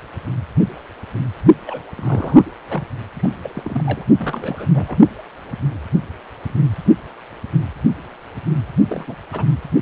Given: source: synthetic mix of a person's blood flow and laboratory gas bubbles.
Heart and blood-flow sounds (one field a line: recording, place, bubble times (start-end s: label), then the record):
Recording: Doppler ultrasound of blood flow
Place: precordium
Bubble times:
1.67-1.81 s: bubbles
1.96-2.50 s: bubbles
2.70-2.83 s: bubbles
3.15-4.05 s: bubbles
4.19-4.67 s: bubbles
4.74-4.97 s: bubbles
8.88-9.15 s: bubbles
9.32-9.45 s: bubbles
From the record:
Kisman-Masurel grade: 221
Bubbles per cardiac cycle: several, 3 to 8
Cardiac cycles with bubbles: 10 to 50%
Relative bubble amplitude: barely perceptible (0.100 to 0.250)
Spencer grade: 2 (many but less than half of the cardiac periods contain bubble signals, singularly or in groups)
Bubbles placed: only in the low amplitude regions of the cardiac cycle